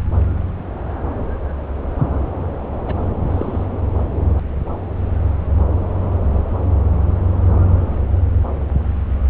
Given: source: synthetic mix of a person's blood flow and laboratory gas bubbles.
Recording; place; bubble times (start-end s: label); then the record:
Doppler ultrasound of blood flow; subclavian vein
2.86-2.96 s: bubbles
3.30-3.66 s: bubbles
From the record:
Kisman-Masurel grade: 121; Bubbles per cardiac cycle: 1 to 2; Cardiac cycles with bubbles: 10 to 50%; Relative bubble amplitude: barely perceptible (0.100 to 0.250); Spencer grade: 2 (many but less than half of the cardiac periods contain bubble signals, singularly or in groups); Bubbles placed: anywhere in the cardiac cycle